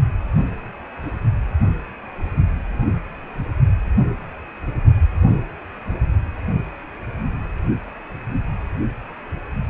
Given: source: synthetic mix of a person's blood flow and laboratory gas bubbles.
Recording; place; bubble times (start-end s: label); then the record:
Doppler ultrasound of blood flow; precordium
no bubbles
From the record:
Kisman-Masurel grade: 000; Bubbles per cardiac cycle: 0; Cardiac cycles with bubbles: 0%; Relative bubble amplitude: no bubbles discernible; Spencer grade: 0 (complete lack of bubble signals)